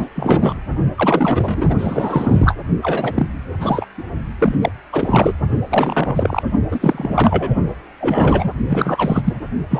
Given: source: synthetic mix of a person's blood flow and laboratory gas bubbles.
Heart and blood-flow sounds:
Doppler ultrasound of blood flow; precordium
0.00-0.09 s: bubbles
0.15-0.54 s: bubbles
0.97-1.75 s: bubbles
1.78-2.56 s: bubbles
2.82-3.26 s: bubbles
3.60-3.85 s: bubbles
3.97-4.04 s: bubbles
4.38-4.54 s: bubbles
4.61-4.71 s: bubbles
4.92-5.33 s: bubbles
5.70-6.42 s: bubbles
6.71-7.55 s: bubbles
8.00-8.52 s: bubbles
8.66-9.22 s: bubbles
9.25-9.34 s: bubbles
9.70-9.80 s: bubbles
From the record:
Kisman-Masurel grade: 343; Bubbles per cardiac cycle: rolling drumbeat, 9 or more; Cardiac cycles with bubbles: 100%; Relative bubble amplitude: loud (0.450 to 0.775); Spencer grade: 3 (all of the cardiac periods contain showers or single bubble signals, but not dominating or overriding the cardiac motion signals); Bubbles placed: only in the low amplitude regions of the cardiac cycle

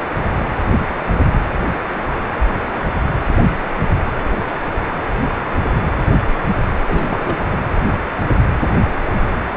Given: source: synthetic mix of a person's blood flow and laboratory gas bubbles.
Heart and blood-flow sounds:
Doppler ultrasound of blood flow; precordium
6.87-7.58 s: bubbles
From the record:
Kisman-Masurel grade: 211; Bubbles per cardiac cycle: several, 3 to 8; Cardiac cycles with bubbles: 1 to 10%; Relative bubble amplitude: barely perceptible (0.100 to 0.250); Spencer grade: 1 (occasional bubble signal discernible with the cardiac motion signal, with majority of cardiac periods free of bubbles); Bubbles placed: anywhere in the cardiac cycle

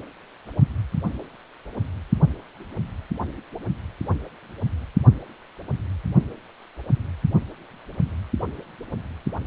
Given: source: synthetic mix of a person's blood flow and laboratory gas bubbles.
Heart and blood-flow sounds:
Doppler ultrasound of blood flow; precordium
no bubbles
From the record:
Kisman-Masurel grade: 000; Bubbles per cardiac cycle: 0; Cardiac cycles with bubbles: 0%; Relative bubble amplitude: no bubbles discernible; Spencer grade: 0 (complete lack of bubble signals)

